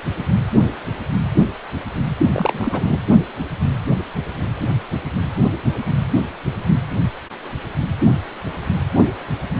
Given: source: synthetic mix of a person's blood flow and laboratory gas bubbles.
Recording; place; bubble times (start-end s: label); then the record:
Doppler ultrasound of blood flow; precordium
2.33-2.99 s: bubbles
From the record:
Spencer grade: 2 (many but less than half of the cardiac periods contain bubble signals, singularly or in groups); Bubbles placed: anywhere in the cardiac cycle